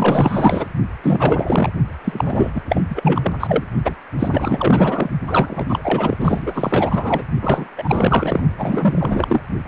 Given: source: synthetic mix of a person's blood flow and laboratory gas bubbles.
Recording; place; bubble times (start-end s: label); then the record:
Doppler ultrasound of blood flow; precordium
0.00-0.65 s: bubbles
1.02-1.70 s: bubbles
2.04-2.61 s: bubbles
2.69-2.83 s: bubbles
2.89-3.32 s: bubbles
3.40-3.63 s: bubbles
3.85-3.94 s: bubbles
4.19-5.10 s: bubbles
5.27-6.17 s: bubbles
6.20-7.22 s: bubbles
7.41-7.71 s: bubbles
7.78-8.41 s: bubbles
8.58-9.44 s: bubbles
From the record:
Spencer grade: 4 (maximum detectable bubble signal sounding continuously throughout systole and diastole of every cardiac period, and overriding the amplitude of the normal cardiac signals); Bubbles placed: only in the low amplitude regions of the cardiac cycle